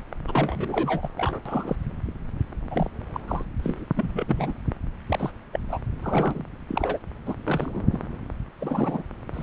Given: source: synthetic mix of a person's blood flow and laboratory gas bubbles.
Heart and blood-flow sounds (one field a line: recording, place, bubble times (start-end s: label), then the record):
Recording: Doppler ultrasound of blood flow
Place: subclavian vein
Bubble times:
0.27-1.09 s: bubbles
1.17-1.41 s: bubbles
1.45-1.76 s: bubbles
2.71-2.91 s: bubbles
3.14-3.21 s: bubbles
3.28-3.45 s: bubbles
3.60-3.84 s: bubbles
3.96-4.53 s: bubbles
4.67-4.73 s: bubbles
5.08-5.31 s: bubbles
5.53-5.60 s: bubbles
5.68-5.80 s: bubbles
6.02-6.44 s: bubbles
6.68-6.99 s: bubbles
7.25-7.35 s: bubbles
7.46-7.99 s: bubbles
8.60-9.03 s: bubbles
9.34-9.43 s: bubbles
From the record:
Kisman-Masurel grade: 242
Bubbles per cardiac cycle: several, 3 to 8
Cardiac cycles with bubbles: 100%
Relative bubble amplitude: moderate (0.250 to 0.450)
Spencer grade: 3 (all of the cardiac periods contain showers or single bubble signals, but not dominating or overriding the cardiac motion signals)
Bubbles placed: anywhere in the cardiac cycle